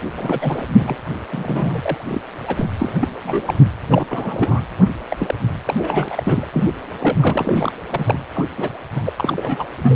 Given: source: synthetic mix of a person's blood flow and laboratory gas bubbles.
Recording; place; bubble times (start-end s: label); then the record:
Doppler ultrasound of blood flow; precordium
0.00-0.04 s: bubbles
0.17-0.63 s: bubbles
0.76-0.95 s: bubbles
1.30-2.21 s: bubbles
2.47-2.68 s: bubbles
2.80-3.08 s: bubbles
3.23-3.42 s: bubbles
3.46-3.54 s: bubbles
3.60-3.70 s: bubbles
3.88-4.62 s: bubbles
5.10-5.17 s: bubbles
5.20-5.34 s: bubbles
5.65-6.48 s: bubbles
6.53-6.70 s: bubbles
7.00-7.72 s: bubbles
7.90-8.18 s: bubbles
8.34-8.46 s: bubbles
8.57-8.69 s: bubbles
8.94-9.64 s: bubbles
9.82-9.95 s: bubbles
From the record:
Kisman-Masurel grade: 342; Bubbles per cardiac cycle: rolling drumbeat, 9 or more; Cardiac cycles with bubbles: 100%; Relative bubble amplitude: moderate (0.250 to 0.450); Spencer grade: 3 (all of the cardiac periods contain showers or single bubble signals, but not dominating or overriding the cardiac motion signals); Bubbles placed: anywhere in the cardiac cycle